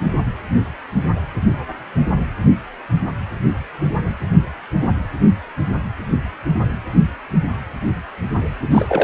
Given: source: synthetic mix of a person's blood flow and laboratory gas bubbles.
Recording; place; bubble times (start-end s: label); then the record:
Doppler ultrasound of blood flow; precordium
8.71-9.04 s: bubbles
From the record:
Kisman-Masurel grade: 213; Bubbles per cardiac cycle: several, 3 to 8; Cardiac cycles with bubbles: 1 to 10%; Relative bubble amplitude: loud (0.450 to 0.775); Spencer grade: 1 (occasional bubble signal discernible with the cardiac motion signal, with majority of cardiac periods free of bubbles); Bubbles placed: anywhere in the cardiac cycle